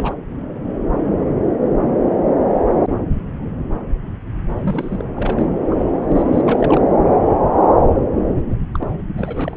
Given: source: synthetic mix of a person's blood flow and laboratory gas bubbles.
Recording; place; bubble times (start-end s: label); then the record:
Doppler ultrasound of blood flow; subclavian vein
0.00-0.14 s: bubbles
4.54-5.02 s: bubbles
5.14-5.46 s: bubbles
5.70-5.76 s: bubbles
5.92-6.29 s: bubbles
6.32-6.81 s: bubbles
8.49-8.58 s: bubbles
8.74-8.92 s: bubbles
9.17-9.57 s: bubbles
From the record:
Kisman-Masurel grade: 221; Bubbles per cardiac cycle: several, 3 to 8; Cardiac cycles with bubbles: 10 to 50%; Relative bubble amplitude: barely perceptible (0.100 to 0.250); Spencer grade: 2 (many but less than half of the cardiac periods contain bubble signals, singularly or in groups); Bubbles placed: anywhere in the cardiac cycle